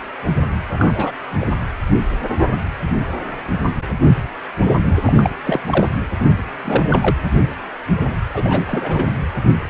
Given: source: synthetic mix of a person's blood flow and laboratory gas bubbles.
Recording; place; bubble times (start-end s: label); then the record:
Doppler ultrasound of blood flow; precordium
0.70-1.12 s: bubbles
1.40-1.45 s: bubbles
5.05-5.13 s: bubbles
5.16-5.30 s: bubbles
5.44-5.59 s: bubbles
5.65-5.88 s: bubbles
6.63-7.15 s: bubbles
8.33-9.08 s: bubbles
From the record:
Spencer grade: 3 (all of the cardiac periods contain showers or single bubble signals, but not dominating or overriding the cardiac motion signals); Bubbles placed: anywhere in the cardiac cycle